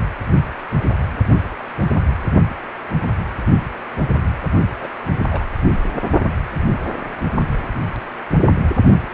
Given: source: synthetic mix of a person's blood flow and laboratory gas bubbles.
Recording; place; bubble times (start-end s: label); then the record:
Doppler ultrasound of blood flow; precordium
1.79-1.94 s: bubbles
4.81-4.88 s: bubbles
5.29-5.44 s: bubbles
6.64-6.73 s: bubbles
From the record:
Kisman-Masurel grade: 121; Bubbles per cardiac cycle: 1 to 2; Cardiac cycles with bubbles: 10 to 50%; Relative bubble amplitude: barely perceptible (0.100 to 0.250); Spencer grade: 2 (many but less than half of the cardiac periods contain bubble signals, singularly or in groups); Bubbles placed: only in the low amplitude regions of the cardiac cycle